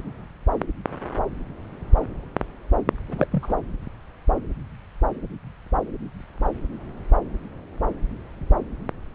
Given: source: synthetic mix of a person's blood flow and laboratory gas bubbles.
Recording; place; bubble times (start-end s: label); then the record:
Doppler ultrasound of blood flow; subclavian vein
3.08-3.27 s: bubbles
3.31-3.54 s: bubbles
From the record:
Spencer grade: 1 (occasional bubble signal discernible with the cardiac motion signal, with majority of cardiac periods free of bubbles); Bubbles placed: anywhere in the cardiac cycle